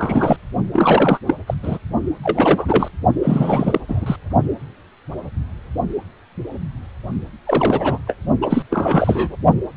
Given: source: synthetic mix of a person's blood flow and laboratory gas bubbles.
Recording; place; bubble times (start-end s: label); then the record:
Doppler ultrasound of blood flow; precordium
0.00-0.36 s: bubbles
0.73-1.19 s: bubbles
1.27-1.35 s: bubbles
1.46-1.54 s: bubbles
1.62-1.78 s: bubbles
2.23-2.88 s: bubbles
3.22-3.80 s: bubbles
3.88-4.16 s: bubbles
7.46-7.98 s: bubbles
8.06-8.16 s: bubbles
8.41-8.63 s: bubbles
8.70-9.35 s: bubbles
From the record:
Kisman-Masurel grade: 333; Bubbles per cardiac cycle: rolling drumbeat, 9 or more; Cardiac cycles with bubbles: 50 to 99%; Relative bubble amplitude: loud (0.450 to 0.775); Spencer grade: 3 (all of the cardiac periods contain showers or single bubble signals, but not dominating or overriding the cardiac motion signals); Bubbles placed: only in the low amplitude regions of the cardiac cycle